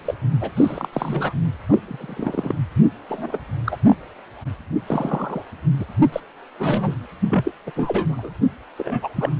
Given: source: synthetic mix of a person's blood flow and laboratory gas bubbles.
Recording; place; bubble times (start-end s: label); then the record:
Doppler ultrasound of blood flow; precordium
0.05-0.15 s: bubbles
0.41-0.51 s: bubbles
0.57-0.89 s: bubbles
0.92-1.32 s: bubbles
1.69-1.78 s: bubbles
1.88-2.54 s: bubbles
3.08-3.38 s: bubbles
3.64-3.77 s: bubbles
3.88-3.96 s: bubbles
4.86-5.43 s: bubbles
5.79-5.85 s: bubbles
6.12-6.20 s: bubbles
6.58-6.95 s: bubbles
7.28-7.51 s: bubbles
7.66-7.71 s: bubbles
7.76-8.29 s: bubbles
8.78-9.09 s: bubbles
9.16-9.30 s: bubbles
From the record:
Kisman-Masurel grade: 242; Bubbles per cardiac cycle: several, 3 to 8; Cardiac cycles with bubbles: 100%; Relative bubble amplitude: moderate (0.250 to 0.450); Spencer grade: 3 (all of the cardiac periods contain showers or single bubble signals, but not dominating or overriding the cardiac motion signals); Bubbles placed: only in the low amplitude regions of the cardiac cycle